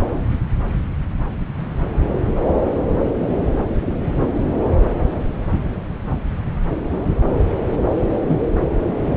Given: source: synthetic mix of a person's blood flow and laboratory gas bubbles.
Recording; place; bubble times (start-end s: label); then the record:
Doppler ultrasound of blood flow; subclavian vein
8.22-8.38 s: bubbles
From the record:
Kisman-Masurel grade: 112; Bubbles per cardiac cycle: 1 to 2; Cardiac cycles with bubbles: 1 to 10%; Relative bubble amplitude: moderate (0.250 to 0.450); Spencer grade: 1 (occasional bubble signal discernible with the cardiac motion signal, with majority of cardiac periods free of bubbles); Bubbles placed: anywhere in the cardiac cycle